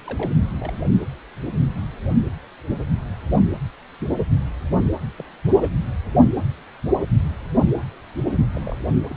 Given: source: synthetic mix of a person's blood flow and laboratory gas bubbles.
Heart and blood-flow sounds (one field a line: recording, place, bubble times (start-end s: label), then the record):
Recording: Doppler ultrasound of blood flow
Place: precordium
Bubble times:
0.04-0.32 s: bubbles
0.59-0.74 s: bubbles
2.04-2.19 s: bubbles
2.21-2.24 s: bubbles
5.17-5.25 s: bubbles
5.57-5.72 s: bubbles
6.98-7.07 s: bubbles
8.54-8.61 s: bubbles
8.65-8.76 s: bubbles
9.10-9.17 s: bubbles
From the record:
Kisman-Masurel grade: 121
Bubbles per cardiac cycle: 1 to 2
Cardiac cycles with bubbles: 10 to 50%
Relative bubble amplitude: barely perceptible (0.100 to 0.250)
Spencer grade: 2 (many but less than half of the cardiac periods contain bubble signals, singularly or in groups)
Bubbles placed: anywhere in the cardiac cycle